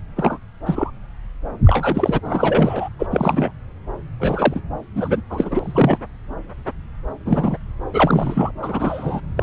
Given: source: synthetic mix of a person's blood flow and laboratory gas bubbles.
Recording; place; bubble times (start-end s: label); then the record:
Doppler ultrasound of blood flow; subclavian vein
0.16-0.38 s: bubbles
0.66-0.91 s: bubbles
1.65-2.20 s: bubbles
2.24-2.88 s: bubbles
2.99-3.07 s: bubbles
3.11-3.51 s: bubbles
4.20-4.61 s: bubbles
4.95-5.21 s: bubbles
5.29-5.99 s: bubbles
7.25-7.57 s: bubbles
7.92-8.52 s: bubbles
8.62-9.21 s: bubbles
9.37-9.43 s: bubbles
From the record:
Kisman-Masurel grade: 233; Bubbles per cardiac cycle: several, 3 to 8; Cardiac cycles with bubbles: 50 to 99%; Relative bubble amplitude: loud (0.450 to 0.775); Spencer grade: 3 (all of the cardiac periods contain showers or single bubble signals, but not dominating or overriding the cardiac motion signals); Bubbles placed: anywhere in the cardiac cycle